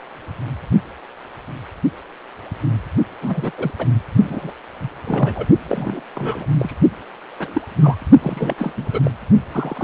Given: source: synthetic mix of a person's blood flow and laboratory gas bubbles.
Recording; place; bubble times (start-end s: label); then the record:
Doppler ultrasound of blood flow; precordium
3.22-3.51 s: bubbles
3.57-3.71 s: bubbles
3.78-3.86 s: bubbles
4.23-4.52 s: bubbles
4.81-4.89 s: bubbles
5.04-5.46 s: bubbles
5.68-6.01 s: bubbles
6.14-6.46 s: bubbles
6.59-6.73 s: bubbles
7.39-7.62 s: bubbles
7.81-7.97 s: bubbles
8.19-8.74 s: bubbles
8.77-8.90 s: bubbles
8.92-9.11 s: bubbles
9.53-9.84 s: bubbles
From the record:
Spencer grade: 3 (all of the cardiac periods contain showers or single bubble signals, but not dominating or overriding the cardiac motion signals); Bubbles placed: only in the low amplitude regions of the cardiac cycle